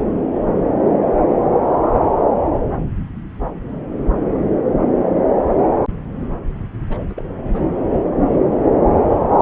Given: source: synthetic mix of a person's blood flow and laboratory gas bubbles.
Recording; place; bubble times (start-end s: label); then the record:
Doppler ultrasound of blood flow; subclavian vein
6.89-6.97 s: bubbles
7.09-7.14 s: bubbles
7.17-7.23 s: bubbles
7.53-7.62 s: bubbles
From the record:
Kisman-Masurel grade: 211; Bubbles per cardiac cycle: several, 3 to 8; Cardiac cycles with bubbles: 1 to 10%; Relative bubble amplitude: barely perceptible (0.100 to 0.250); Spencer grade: 1 (occasional bubble signal discernible with the cardiac motion signal, with majority of cardiac periods free of bubbles); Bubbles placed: anywhere in the cardiac cycle